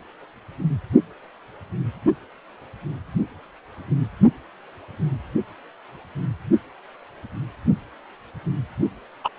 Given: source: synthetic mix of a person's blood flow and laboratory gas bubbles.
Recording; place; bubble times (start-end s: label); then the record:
Doppler ultrasound of blood flow; precordium
9.24-9.29 s: bubbles
From the record:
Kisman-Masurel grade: 223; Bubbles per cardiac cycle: several, 3 to 8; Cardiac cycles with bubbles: 10 to 50%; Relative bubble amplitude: loud (0.450 to 0.775); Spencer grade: 2 (many but less than half of the cardiac periods contain bubble signals, singularly or in groups); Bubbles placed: only in the low amplitude regions of the cardiac cycle